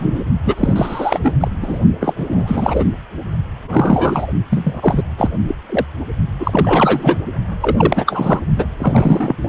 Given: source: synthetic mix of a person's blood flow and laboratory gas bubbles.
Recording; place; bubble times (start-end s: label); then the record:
Doppler ultrasound of blood flow; precordium
0.00-0.24 s: bubbles
0.45-1.19 s: bubbles
1.22-1.33 s: bubbles
1.40-1.48 s: bubbles
1.62-1.79 s: bubbles
1.99-2.85 s: bubbles
3.67-4.27 s: bubbles
4.50-5.03 s: bubbles
5.17-5.32 s: bubbles
5.48-5.55 s: bubbles
5.69-5.87 s: bubbles
6.39-7.17 s: bubbles
7.61-8.39 s: bubbles
8.56-8.65 s: bubbles
8.79-9.36 s: bubbles
9.42-9.49 s: bubbles
From the record:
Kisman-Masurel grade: 343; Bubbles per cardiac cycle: rolling drumbeat, 9 or more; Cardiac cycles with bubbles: 100%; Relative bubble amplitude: loud (0.450 to 0.775); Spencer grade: 3 (all of the cardiac periods contain showers or single bubble signals, but not dominating or overriding the cardiac motion signals); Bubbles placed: only in the low amplitude regions of the cardiac cycle